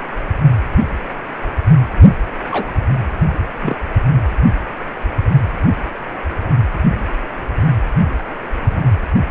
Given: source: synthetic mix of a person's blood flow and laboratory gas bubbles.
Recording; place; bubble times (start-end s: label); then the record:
Doppler ultrasound of blood flow; precordium
2.51-2.72 s: bubbles
3.61-3.76 s: bubbles
8.59-8.83 s: bubbles
From the record:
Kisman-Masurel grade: 122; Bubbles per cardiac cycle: 1 to 2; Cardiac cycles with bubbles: 10 to 50%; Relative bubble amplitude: moderate (0.250 to 0.450); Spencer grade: 2 (many but less than half of the cardiac periods contain bubble signals, singularly or in groups); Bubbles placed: anywhere in the cardiac cycle